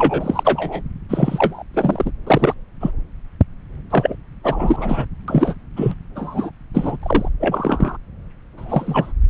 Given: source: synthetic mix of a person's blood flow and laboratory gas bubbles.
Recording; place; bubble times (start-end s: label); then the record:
Doppler ultrasound of blood flow; subclavian vein
0.00-0.82 s: bubbles
1.09-1.63 s: bubbles
1.73-2.11 s: bubbles
2.27-2.54 s: bubbles
2.80-2.91 s: bubbles
3.90-4.16 s: bubbles
4.43-5.05 s: bubbles
5.28-5.55 s: bubbles
5.76-5.94 s: bubbles
6.16-6.50 s: bubbles
6.74-6.96 s: bubbles
7.03-7.29 s: bubbles
7.39-7.97 s: bubbles
8.57-9.13 s: bubbles
From the record:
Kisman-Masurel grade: 243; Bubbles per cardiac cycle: several, 3 to 8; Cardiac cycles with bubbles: 100%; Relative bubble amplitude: loud (0.450 to 0.775); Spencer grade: 3 (all of the cardiac periods contain showers or single bubble signals, but not dominating or overriding the cardiac motion signals); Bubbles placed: anywhere in the cardiac cycle